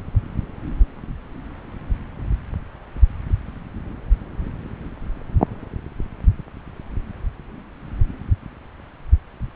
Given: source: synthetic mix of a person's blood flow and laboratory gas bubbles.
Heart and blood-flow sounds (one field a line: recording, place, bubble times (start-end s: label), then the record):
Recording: Doppler ultrasound of blood flow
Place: subclavian vein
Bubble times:
no bubbles
From the record:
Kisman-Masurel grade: 000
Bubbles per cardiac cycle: 0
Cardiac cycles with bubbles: 0%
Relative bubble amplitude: no bubbles discernible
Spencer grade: 0 (complete lack of bubble signals)